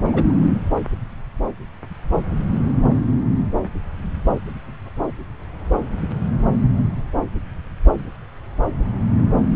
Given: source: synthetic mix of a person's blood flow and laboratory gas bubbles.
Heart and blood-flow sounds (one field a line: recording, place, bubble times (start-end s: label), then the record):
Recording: Doppler ultrasound of blood flow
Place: subclavian vein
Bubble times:
0.05-0.34 s: bubbles
From the record:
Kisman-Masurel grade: 112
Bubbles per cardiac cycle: 1 to 2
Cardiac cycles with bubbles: 1 to 10%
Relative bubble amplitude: moderate (0.250 to 0.450)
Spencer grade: 1 (occasional bubble signal discernible with the cardiac motion signal, with majority of cardiac periods free of bubbles)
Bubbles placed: anywhere in the cardiac cycle